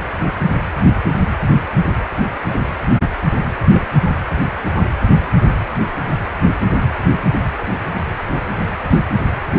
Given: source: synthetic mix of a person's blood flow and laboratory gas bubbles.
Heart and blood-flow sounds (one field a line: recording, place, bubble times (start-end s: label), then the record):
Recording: Doppler ultrasound of blood flow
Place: precordium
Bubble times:
0.77-0.83 s: bubbles
3.72-3.81 s: bubbles
3.93-3.97 s: bubbles
From the record:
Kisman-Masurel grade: 121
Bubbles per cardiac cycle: 1 to 2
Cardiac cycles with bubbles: 10 to 50%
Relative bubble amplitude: barely perceptible (0.100 to 0.250)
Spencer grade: 2 (many but less than half of the cardiac periods contain bubble signals, singularly or in groups)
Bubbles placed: anywhere in the cardiac cycle